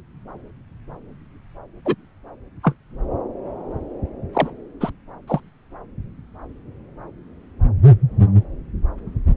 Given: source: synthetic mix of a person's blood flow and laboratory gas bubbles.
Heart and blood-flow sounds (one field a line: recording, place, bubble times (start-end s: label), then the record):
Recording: Doppler ultrasound of blood flow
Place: subclavian vein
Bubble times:
1.85-1.95 s: bubbles
2.63-2.74 s: bubbles
4.33-4.50 s: bubbles
4.80-4.90 s: bubbles
5.27-5.40 s: bubbles
From the record:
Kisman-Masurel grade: 122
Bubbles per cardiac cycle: 1 to 2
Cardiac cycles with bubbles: 10 to 50%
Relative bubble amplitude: moderate (0.250 to 0.450)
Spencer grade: 2 (many but less than half of the cardiac periods contain bubble signals, singularly or in groups)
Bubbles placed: anywhere in the cardiac cycle